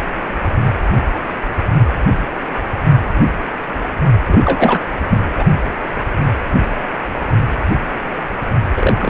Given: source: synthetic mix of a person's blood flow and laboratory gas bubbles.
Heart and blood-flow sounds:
Doppler ultrasound of blood flow; precordium
4.28-4.79 s: bubbles
5.10-5.18 s: bubbles
5.37-5.46 s: bubbles
8.76-9.10 s: bubbles
From the record:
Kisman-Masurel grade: 223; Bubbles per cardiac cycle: several, 3 to 8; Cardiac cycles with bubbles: 10 to 50%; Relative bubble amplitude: loud (0.450 to 0.775); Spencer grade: 2 (many but less than half of the cardiac periods contain bubble signals, singularly or in groups); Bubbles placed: only in the low amplitude regions of the cardiac cycle

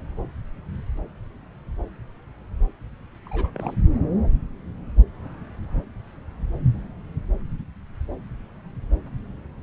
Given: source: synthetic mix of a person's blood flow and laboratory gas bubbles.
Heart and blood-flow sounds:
Doppler ultrasound of blood flow; subclavian vein
3.26-3.50 s: bubbles
3.54-3.77 s: bubbles
From the record:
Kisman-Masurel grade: 211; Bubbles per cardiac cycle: several, 3 to 8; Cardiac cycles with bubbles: 1 to 10%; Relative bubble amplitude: barely perceptible (0.100 to 0.250); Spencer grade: 1 (occasional bubble signal discernible with the cardiac motion signal, with majority of cardiac periods free of bubbles); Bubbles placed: anywhere in the cardiac cycle

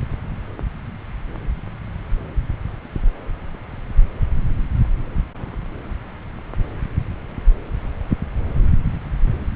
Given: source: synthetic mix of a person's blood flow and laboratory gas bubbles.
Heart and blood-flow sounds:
Doppler ultrasound of blood flow; subclavian vein
no bubbles
From the record:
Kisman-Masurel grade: 000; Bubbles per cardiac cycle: 0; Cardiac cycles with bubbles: 0%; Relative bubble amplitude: no bubbles discernible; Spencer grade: 0 (complete lack of bubble signals)

